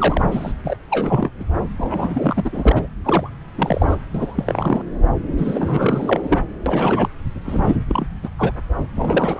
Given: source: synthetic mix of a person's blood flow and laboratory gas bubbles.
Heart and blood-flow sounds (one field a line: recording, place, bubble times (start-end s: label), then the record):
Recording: Doppler ultrasound of blood flow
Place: subclavian vein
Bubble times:
0.00-0.26 s: bubbles
0.31-0.52 s: bubbles
0.64-0.76 s: bubbles
0.90-1.30 s: bubbles
1.40-1.44 s: bubbles
1.77-2.87 s: bubbles
3.04-3.30 s: bubbles
3.58-3.97 s: bubbles
4.14-4.84 s: bubbles
5.38-6.38 s: bubbles
6.66-7.09 s: bubbles
7.45-7.76 s: bubbles
7.88-8.06 s: bubbles
8.22-8.29 s: bubbles
8.37-8.53 s: bubbles
8.96-9.40 s: bubbles
From the record:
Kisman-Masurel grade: 343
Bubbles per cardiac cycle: rolling drumbeat, 9 or more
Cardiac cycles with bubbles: 100%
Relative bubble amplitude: loud (0.450 to 0.775)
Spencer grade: 3 (all of the cardiac periods contain showers or single bubble signals, but not dominating or overriding the cardiac motion signals)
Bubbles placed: anywhere in the cardiac cycle